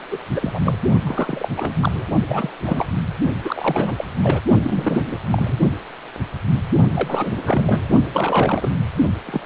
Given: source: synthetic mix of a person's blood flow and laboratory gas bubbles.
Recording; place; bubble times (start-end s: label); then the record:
Doppler ultrasound of blood flow; precordium
0.10-0.18 s: bubbles
0.34-0.78 s: bubbles
1.06-1.49 s: bubbles
1.57-2.03 s: bubbles
2.28-2.50 s: bubbles
2.66-2.87 s: bubbles
3.44-4.04 s: bubbles
4.23-4.42 s: bubbles
4.63-5.17 s: bubbles
5.31-5.57 s: bubbles
6.94-7.89 s: bubbles
8.13-8.70 s: bubbles
9.26-9.40 s: bubbles
From the record:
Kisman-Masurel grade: 332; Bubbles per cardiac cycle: rolling drumbeat, 9 or more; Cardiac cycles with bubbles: 50 to 99%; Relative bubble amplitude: moderate (0.250 to 0.450); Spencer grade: 3 (all of the cardiac periods contain showers or single bubble signals, but not dominating or overriding the cardiac motion signals); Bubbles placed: only in the low amplitude regions of the cardiac cycle